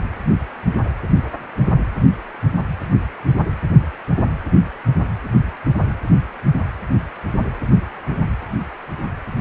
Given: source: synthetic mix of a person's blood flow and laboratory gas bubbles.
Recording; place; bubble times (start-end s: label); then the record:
Doppler ultrasound of blood flow; precordium
no bubbles
From the record:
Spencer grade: 0 (complete lack of bubble signals)